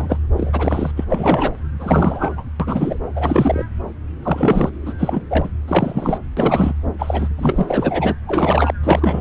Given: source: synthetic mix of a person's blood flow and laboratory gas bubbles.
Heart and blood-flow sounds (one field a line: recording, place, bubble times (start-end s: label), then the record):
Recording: Doppler ultrasound of blood flow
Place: subclavian vein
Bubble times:
0.00-0.17 s: bubbles
0.37-0.92 s: bubbles
0.96-1.05 s: bubbles
1.09-1.53 s: bubbles
1.79-2.45 s: bubbles
2.60-2.99 s: bubbles
3.16-3.65 s: bubbles
4.22-4.70 s: bubbles
4.85-4.93 s: bubbles
4.99-5.22 s: bubbles
5.29-5.49 s: bubbles
5.67-6.18 s: bubbles
6.37-6.74 s: bubbles
6.98-7.29 s: bubbles
7.37-8.16 s: bubbles
8.27-8.73 s: bubbles
8.83-9.21 s: bubbles
From the record:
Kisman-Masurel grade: 333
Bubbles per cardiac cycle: rolling drumbeat, 9 or more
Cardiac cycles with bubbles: 50 to 99%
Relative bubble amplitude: loud (0.450 to 0.775)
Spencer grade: 3 (all of the cardiac periods contain showers or single bubble signals, but not dominating or overriding the cardiac motion signals)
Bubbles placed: anywhere in the cardiac cycle